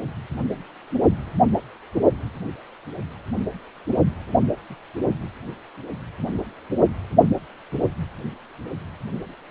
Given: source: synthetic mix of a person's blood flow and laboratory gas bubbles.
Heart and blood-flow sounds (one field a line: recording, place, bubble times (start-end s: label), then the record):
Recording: Doppler ultrasound of blood flow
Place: precordium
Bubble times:
4.69-4.75 s: bubbles
From the record:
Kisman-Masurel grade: 121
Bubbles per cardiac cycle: 1 to 2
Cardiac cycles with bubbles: 10 to 50%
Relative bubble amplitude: barely perceptible (0.100 to 0.250)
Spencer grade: 2 (many but less than half of the cardiac periods contain bubble signals, singularly or in groups)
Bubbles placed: only in the low amplitude regions of the cardiac cycle